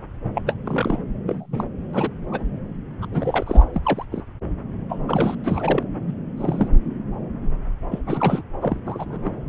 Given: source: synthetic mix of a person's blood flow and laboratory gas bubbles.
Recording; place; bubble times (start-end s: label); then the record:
Doppler ultrasound of blood flow; subclavian vein
0.34-0.42 s: bubbles
0.47-0.54 s: bubbles
0.66-0.99 s: bubbles
1.26-1.64 s: bubbles
1.93-2.10 s: bubbles
2.32-2.46 s: bubbles
3.02-3.06 s: bubbles
3.12-3.63 s: bubbles
3.74-4.05 s: bubbles
4.11-4.22 s: bubbles
4.89-5.01 s: bubbles
5.07-5.35 s: bubbles
5.44-5.83 s: bubbles
6.06-6.15 s: bubbles
6.37-6.68 s: bubbles
7.91-8.00 s: bubbles
8.06-8.42 s: bubbles
8.61-8.78 s: bubbles
8.87-9.30 s: bubbles
From the record:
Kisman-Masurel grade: 232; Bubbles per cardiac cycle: several, 3 to 8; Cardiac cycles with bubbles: 50 to 99%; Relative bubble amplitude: moderate (0.250 to 0.450); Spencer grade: 3 (all of the cardiac periods contain showers or single bubble signals, but not dominating or overriding the cardiac motion signals); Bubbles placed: anywhere in the cardiac cycle